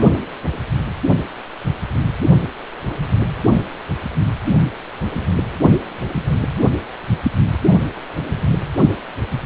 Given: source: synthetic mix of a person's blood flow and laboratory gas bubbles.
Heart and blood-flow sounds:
Doppler ultrasound of blood flow; precordium
6.61-6.69 s: bubbles
From the record:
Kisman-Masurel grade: 113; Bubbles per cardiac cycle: 1 to 2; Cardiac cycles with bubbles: 1 to 10%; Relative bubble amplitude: loud (0.450 to 0.775); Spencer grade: 1 (occasional bubble signal discernible with the cardiac motion signal, with majority of cardiac periods free of bubbles); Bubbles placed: anywhere in the cardiac cycle

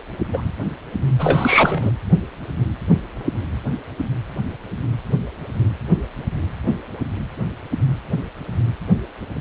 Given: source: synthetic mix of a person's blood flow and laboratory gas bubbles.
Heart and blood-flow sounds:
Doppler ultrasound of blood flow; precordium
0.33-0.41 s: bubbles
1.19-1.92 s: bubbles
From the record:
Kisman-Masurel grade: 223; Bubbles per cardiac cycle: several, 3 to 8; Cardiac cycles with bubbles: 10 to 50%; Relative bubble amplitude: loud (0.450 to 0.775); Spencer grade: 2 (many but less than half of the cardiac periods contain bubble signals, singularly or in groups); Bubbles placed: anywhere in the cardiac cycle

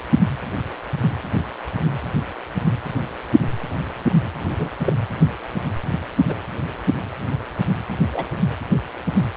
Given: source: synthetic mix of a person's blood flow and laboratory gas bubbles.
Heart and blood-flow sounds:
Doppler ultrasound of blood flow; precordium
4.58-4.70 s: bubbles
4.84-4.93 s: bubbles
6.27-6.35 s: bubbles
8.13-8.24 s: bubbles
From the record:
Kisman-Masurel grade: 122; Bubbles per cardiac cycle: 1 to 2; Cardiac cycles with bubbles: 10 to 50%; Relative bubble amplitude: moderate (0.250 to 0.450); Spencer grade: 2 (many but less than half of the cardiac periods contain bubble signals, singularly or in groups); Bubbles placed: anywhere in the cardiac cycle

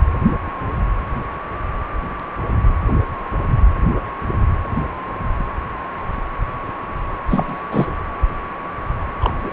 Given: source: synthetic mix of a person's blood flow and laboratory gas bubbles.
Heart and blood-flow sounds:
Doppler ultrasound of blood flow; precordium
7.29-7.59 s: bubbles
7.72-7.92 s: bubbles
9.21-9.32 s: bubbles
9.41-9.51 s: bubbles
From the record:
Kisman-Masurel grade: 223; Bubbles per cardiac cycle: several, 3 to 8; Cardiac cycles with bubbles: 10 to 50%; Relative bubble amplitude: loud (0.450 to 0.775); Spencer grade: 2 (many but less than half of the cardiac periods contain bubble signals, singularly or in groups); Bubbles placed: anywhere in the cardiac cycle

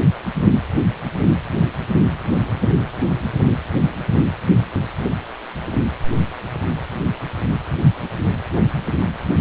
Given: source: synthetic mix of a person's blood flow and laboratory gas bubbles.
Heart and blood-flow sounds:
Doppler ultrasound of blood flow; precordium
no bubbles
From the record:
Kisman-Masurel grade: 000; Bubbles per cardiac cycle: 0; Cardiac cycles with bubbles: 0%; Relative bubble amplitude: no bubbles discernible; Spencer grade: 0 (complete lack of bubble signals)

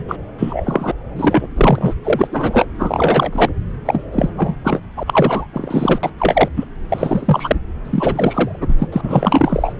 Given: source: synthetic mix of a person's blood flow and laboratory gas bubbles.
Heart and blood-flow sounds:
Doppler ultrasound of blood flow; subclavian vein
0.08-0.16 s: bubbles
0.38-0.91 s: bubbles
1.16-1.48 s: bubbles
1.56-1.94 s: bubbles
2.04-2.27 s: bubbles
2.31-2.66 s: bubbles
2.78-3.50 s: bubbles
3.85-4.04 s: bubbles
4.12-4.29 s: bubbles
4.37-4.55 s: bubbles
4.64-4.79 s: bubbles
4.96-5.04 s: bubbles
5.06-5.46 s: bubbles
5.53-6.00 s: bubbles
6.03-6.10 s: bubbles
6.18-6.49 s: bubbles
6.56-6.64 s: bubbles
6.88-7.56 s: bubbles
7.84-8.74 s: bubbles
8.79-8.86 s: bubbles
8.92-9.73 s: bubbles
From the record:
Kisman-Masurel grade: 343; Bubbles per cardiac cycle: rolling drumbeat, 9 or more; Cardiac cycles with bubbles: 100%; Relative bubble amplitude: loud (0.450 to 0.775); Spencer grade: 3 (all of the cardiac periods contain showers or single bubble signals, but not dominating or overriding the cardiac motion signals); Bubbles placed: anywhere in the cardiac cycle

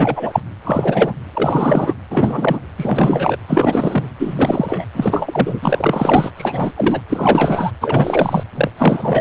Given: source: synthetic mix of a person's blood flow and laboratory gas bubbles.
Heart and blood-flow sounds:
Doppler ultrasound of blood flow; precordium
0.00-0.40 s: bubbles
0.64-1.13 s: bubbles
1.33-1.94 s: bubbles
2.10-2.60 s: bubbles
2.78-3.37 s: bubbles
3.48-4.08 s: bubbles
4.19-4.84 s: bubbles
4.94-6.30 s: bubbles
6.37-6.73 s: bubbles
6.77-7.01 s: bubbles
7.08-7.72 s: bubbles
7.81-8.43 s: bubbles
8.55-8.71 s: bubbles
8.78-9.21 s: bubbles
From the record:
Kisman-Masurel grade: 343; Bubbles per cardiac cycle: rolling drumbeat, 9 or more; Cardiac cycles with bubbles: 100%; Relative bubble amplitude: loud (0.450 to 0.775); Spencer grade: 3 (all of the cardiac periods contain showers or single bubble signals, but not dominating or overriding the cardiac motion signals); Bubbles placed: anywhere in the cardiac cycle

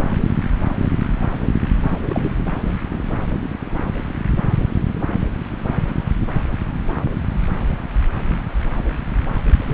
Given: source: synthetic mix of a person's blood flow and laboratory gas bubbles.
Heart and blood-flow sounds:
Doppler ultrasound of blood flow; subclavian vein
1.89-1.99 s: bubbles
2.07-2.35 s: bubbles
9.59-9.74 s: bubbles
From the record:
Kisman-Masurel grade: 221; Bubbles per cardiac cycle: several, 3 to 8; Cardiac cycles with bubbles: 10 to 50%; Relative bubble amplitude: barely perceptible (0.100 to 0.250); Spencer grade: 2 (many but less than half of the cardiac periods contain bubble signals, singularly or in groups); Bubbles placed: anywhere in the cardiac cycle

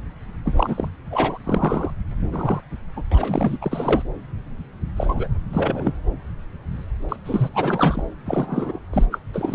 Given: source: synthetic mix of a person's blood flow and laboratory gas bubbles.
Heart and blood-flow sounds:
Doppler ultrasound of blood flow; subclavian vein
0.45-0.88 s: bubbles
1.10-1.38 s: bubbles
1.43-1.91 s: bubbles
2.32-2.60 s: bubbles
2.96-3.02 s: bubbles
3.11-3.58 s: bubbles
3.61-4.03 s: bubbles
4.96-5.27 s: bubbles
5.50-5.92 s: bubbles
7.08-7.16 s: bubbles
7.25-7.49 s: bubbles
7.53-8.04 s: bubbles
8.26-8.79 s: bubbles
8.93-9.06 s: bubbles
9.12-9.19 s: bubbles
9.34-9.55 s: bubbles
From the record:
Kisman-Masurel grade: 232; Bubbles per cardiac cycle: several, 3 to 8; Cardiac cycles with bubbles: 50 to 99%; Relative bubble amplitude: moderate (0.250 to 0.450); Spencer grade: 3 (all of the cardiac periods contain showers or single bubble signals, but not dominating or overriding the cardiac motion signals); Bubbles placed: anywhere in the cardiac cycle

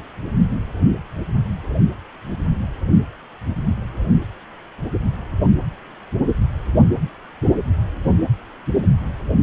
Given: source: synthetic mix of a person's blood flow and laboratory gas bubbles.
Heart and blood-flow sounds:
Doppler ultrasound of blood flow; precordium
no bubbles
From the record:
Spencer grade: 0 (complete lack of bubble signals)

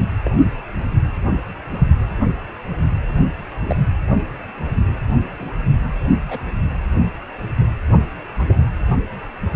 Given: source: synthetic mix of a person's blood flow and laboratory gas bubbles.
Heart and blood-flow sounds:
Doppler ultrasound of blood flow; precordium
0.26-0.31 s: bubbles
3.63-3.76 s: bubbles
5.39-5.51 s: bubbles
6.28-6.42 s: bubbles
8.38-8.56 s: bubbles
From the record:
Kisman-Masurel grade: 122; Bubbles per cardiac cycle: 1 to 2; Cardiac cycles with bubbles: 10 to 50%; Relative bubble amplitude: moderate (0.250 to 0.450); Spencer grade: 2 (many but less than half of the cardiac periods contain bubble signals, singularly or in groups); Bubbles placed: anywhere in the cardiac cycle

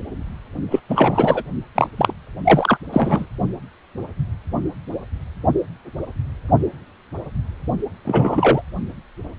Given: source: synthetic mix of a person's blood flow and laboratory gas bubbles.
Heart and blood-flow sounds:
Doppler ultrasound of blood flow; precordium
0.71-0.79 s: bubbles
0.89-1.43 s: bubbles
1.75-1.88 s: bubbles
1.97-2.13 s: bubbles
2.44-2.77 s: bubbles
2.92-3.26 s: bubbles
8.04-8.62 s: bubbles
From the record:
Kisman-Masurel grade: 223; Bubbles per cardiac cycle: several, 3 to 8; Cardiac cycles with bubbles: 10 to 50%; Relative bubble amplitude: loud (0.450 to 0.775); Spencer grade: 2 (many but less than half of the cardiac periods contain bubble signals, singularly or in groups); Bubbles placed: only in the low amplitude regions of the cardiac cycle

